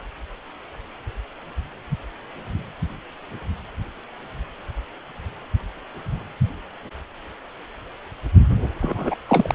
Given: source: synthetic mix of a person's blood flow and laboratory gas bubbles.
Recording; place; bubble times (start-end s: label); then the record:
Doppler ultrasound of blood flow; precordium
8.81-9.16 s: bubbles
9.29-9.55 s: bubbles
From the record:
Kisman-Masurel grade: 212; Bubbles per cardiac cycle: several, 3 to 8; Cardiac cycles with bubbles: 1 to 10%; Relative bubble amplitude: moderate (0.250 to 0.450); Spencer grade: 1 (occasional bubble signal discernible with the cardiac motion signal, with majority of cardiac periods free of bubbles); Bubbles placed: anywhere in the cardiac cycle